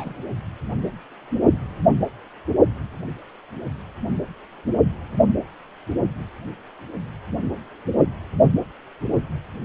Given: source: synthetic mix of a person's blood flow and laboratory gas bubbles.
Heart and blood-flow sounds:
Doppler ultrasound of blood flow; precordium
0.00-0.14 s: bubbles
From the record:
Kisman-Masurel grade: 211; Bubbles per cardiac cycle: several, 3 to 8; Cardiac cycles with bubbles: 1 to 10%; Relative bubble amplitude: barely perceptible (0.100 to 0.250); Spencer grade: 1 (occasional bubble signal discernible with the cardiac motion signal, with majority of cardiac periods free of bubbles); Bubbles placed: only in the low amplitude regions of the cardiac cycle

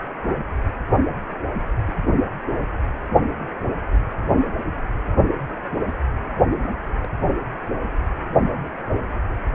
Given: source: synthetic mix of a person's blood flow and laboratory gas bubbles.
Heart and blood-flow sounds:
Doppler ultrasound of blood flow; precordium
1.80-1.97 s: bubbles
3.08-3.55 s: bubbles
3.92-3.97 s: bubbles
6.50-6.61 s: bubbles
7.03-7.08 s: bubbles
From the record:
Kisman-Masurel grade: 121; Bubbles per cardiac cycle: 1 to 2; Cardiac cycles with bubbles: 10 to 50%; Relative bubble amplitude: barely perceptible (0.100 to 0.250); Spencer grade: 2 (many but less than half of the cardiac periods contain bubble signals, singularly or in groups); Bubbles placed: anywhere in the cardiac cycle

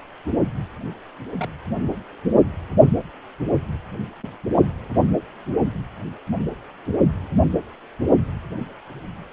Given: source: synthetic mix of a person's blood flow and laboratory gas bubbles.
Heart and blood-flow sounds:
Doppler ultrasound of blood flow; precordium
1.39-1.48 s: bubbles
From the record:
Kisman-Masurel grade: 111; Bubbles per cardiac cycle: 1 to 2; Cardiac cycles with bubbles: 1 to 10%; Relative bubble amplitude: barely perceptible (0.100 to 0.250); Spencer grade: 1 (occasional bubble signal discernible with the cardiac motion signal, with majority of cardiac periods free of bubbles); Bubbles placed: only in the low amplitude regions of the cardiac cycle

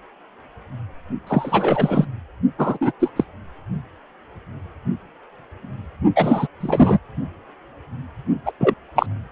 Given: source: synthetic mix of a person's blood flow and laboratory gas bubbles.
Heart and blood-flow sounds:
Doppler ultrasound of blood flow; precordium
1.26-2.07 s: bubbles
2.58-2.78 s: bubbles
2.80-2.92 s: bubbles
3.00-3.10 s: bubbles
3.16-3.24 s: bubbles
6.15-6.48 s: bubbles
6.61-6.99 s: bubbles
8.46-8.52 s: bubbles
8.60-8.74 s: bubbles
8.95-9.06 s: bubbles
From the record:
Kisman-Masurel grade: 233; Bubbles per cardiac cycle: several, 3 to 8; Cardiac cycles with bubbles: 50 to 99%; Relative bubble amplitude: loud (0.450 to 0.775); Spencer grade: 3 (all of the cardiac periods contain showers or single bubble signals, but not dominating or overriding the cardiac motion signals); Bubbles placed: only in the low amplitude regions of the cardiac cycle

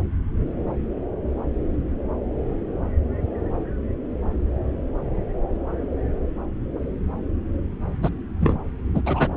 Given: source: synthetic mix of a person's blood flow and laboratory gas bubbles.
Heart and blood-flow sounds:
Doppler ultrasound of blood flow; subclavian vein
8.03-8.09 s: bubbles
8.40-8.56 s: bubbles
8.95-9.01 s: bubbles
9.06-9.28 s: bubbles
From the record:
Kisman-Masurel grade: 223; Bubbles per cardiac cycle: several, 3 to 8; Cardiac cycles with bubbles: 10 to 50%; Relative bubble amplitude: loud (0.450 to 0.775); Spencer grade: 2 (many but less than half of the cardiac periods contain bubble signals, singularly or in groups); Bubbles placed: anywhere in the cardiac cycle

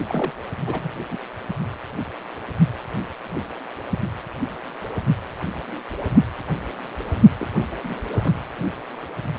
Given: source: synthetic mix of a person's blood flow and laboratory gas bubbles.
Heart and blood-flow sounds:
Doppler ultrasound of blood flow; precordium
0.08-0.33 s: bubbles
0.66-0.92 s: bubbles
1.10-1.18 s: bubbles
7.39-7.47 s: bubbles
7.71-7.77 s: bubbles
7.84-7.95 s: bubbles
8.11-8.32 s: bubbles
From the record:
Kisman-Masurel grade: 221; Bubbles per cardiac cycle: several, 3 to 8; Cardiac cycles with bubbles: 10 to 50%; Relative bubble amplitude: barely perceptible (0.100 to 0.250); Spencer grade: 2 (many but less than half of the cardiac periods contain bubble signals, singularly or in groups); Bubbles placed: only in the low amplitude regions of the cardiac cycle

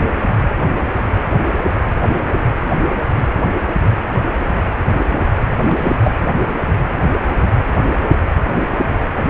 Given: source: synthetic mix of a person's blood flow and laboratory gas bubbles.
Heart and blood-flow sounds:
Doppler ultrasound of blood flow; precordium
5.62-5.93 s: bubbles
6.03-6.15 s: bubbles
From the record:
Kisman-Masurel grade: 212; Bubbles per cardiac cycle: several, 3 to 8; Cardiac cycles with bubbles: 1 to 10%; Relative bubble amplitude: moderate (0.250 to 0.450); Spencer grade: 1 (occasional bubble signal discernible with the cardiac motion signal, with majority of cardiac periods free of bubbles); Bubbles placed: anywhere in the cardiac cycle

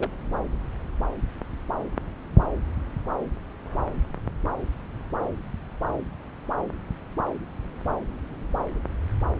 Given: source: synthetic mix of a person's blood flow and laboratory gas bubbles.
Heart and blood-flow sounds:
Doppler ultrasound of blood flow; subclavian vein
0.00-0.10 s: bubbles
From the record:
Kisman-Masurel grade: 111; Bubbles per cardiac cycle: 1 to 2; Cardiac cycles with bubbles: 1 to 10%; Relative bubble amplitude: barely perceptible (0.100 to 0.250); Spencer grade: 1 (occasional bubble signal discernible with the cardiac motion signal, with majority of cardiac periods free of bubbles); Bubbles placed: anywhere in the cardiac cycle

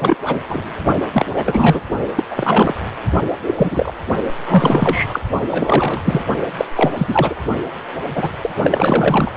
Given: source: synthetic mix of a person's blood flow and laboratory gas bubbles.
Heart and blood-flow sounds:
Doppler ultrasound of blood flow; precordium
0.00-0.15 s: bubbles
0.26-0.45 s: bubbles
0.50-0.64 s: bubbles
1.12-1.26 s: bubbles
1.34-1.81 s: bubbles
2.15-2.23 s: bubbles
2.31-2.76 s: bubbles
3.46-3.93 s: bubbles
4.45-5.19 s: bubbles
5.42-6.01 s: bubbles
6.04-6.23 s: bubbles
6.57-6.65 s: bubbles
6.75-6.90 s: bubbles
6.97-7.36 s: bubbles
8.15-8.29 s: bubbles
8.43-8.51 s: bubbles
8.63-9.32 s: bubbles
From the record:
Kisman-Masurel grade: 343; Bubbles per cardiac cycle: rolling drumbeat, 9 or more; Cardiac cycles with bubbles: 100%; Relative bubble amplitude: loud (0.450 to 0.775); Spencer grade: 3 (all of the cardiac periods contain showers or single bubble signals, but not dominating or overriding the cardiac motion signals); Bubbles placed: only in the low amplitude regions of the cardiac cycle

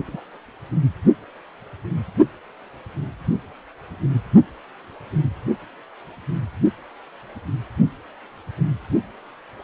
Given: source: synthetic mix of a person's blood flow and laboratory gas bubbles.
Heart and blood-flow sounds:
Doppler ultrasound of blood flow; precordium
0.08-0.21 s: bubbles
From the record:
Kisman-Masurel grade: 211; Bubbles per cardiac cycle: several, 3 to 8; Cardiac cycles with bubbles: 1 to 10%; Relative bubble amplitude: barely perceptible (0.100 to 0.250); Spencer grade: 1 (occasional bubble signal discernible with the cardiac motion signal, with majority of cardiac periods free of bubbles); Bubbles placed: only in the low amplitude regions of the cardiac cycle

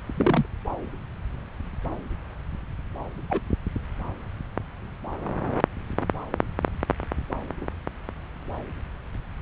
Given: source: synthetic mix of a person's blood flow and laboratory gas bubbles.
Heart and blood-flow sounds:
Doppler ultrasound of blood flow; subclavian vein
0.14-0.46 s: bubbles
3.29-3.41 s: bubbles
7.61-7.67 s: bubbles
From the record:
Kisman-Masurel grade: 121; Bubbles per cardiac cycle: 1 to 2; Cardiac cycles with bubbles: 10 to 50%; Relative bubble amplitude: barely perceptible (0.100 to 0.250); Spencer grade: 2 (many but less than half of the cardiac periods contain bubble signals, singularly or in groups); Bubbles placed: anywhere in the cardiac cycle

